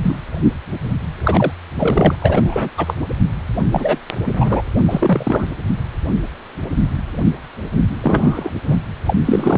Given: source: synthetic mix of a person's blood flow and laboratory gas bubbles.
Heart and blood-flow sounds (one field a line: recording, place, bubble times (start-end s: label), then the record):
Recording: Doppler ultrasound of blood flow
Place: precordium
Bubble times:
0.02-0.16 s: bubbles
1.23-1.52 s: bubbles
1.79-2.16 s: bubbles
2.21-2.70 s: bubbles
2.77-2.94 s: bubbles
3.72-4.00 s: bubbles
4.25-4.61 s: bubbles
4.87-5.46 s: bubbles
8.01-8.51 s: bubbles
8.66-8.77 s: bubbles
9.05-9.14 s: bubbles
9.25-9.58 s: bubbles
From the record:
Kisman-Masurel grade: 233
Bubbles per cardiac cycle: several, 3 to 8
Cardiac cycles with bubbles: 50 to 99%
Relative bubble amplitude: loud (0.450 to 0.775)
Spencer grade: 3 (all of the cardiac periods contain showers or single bubble signals, but not dominating or overriding the cardiac motion signals)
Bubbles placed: anywhere in the cardiac cycle